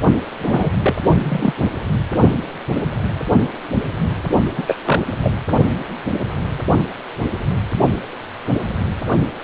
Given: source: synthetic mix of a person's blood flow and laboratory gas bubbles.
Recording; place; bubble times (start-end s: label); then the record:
Doppler ultrasound of blood flow; precordium
0.39-0.77 s: bubbles
0.80-0.94 s: bubbles
1.09-1.54 s: bubbles
4.56-4.76 s: bubbles
4.85-5.02 s: bubbles
5.23-5.31 s: bubbles
From the record:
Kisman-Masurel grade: 222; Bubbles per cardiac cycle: several, 3 to 8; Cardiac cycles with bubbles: 10 to 50%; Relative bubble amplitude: moderate (0.250 to 0.450); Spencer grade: 2 (many but less than half of the cardiac periods contain bubble signals, singularly or in groups); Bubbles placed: only in the low amplitude regions of the cardiac cycle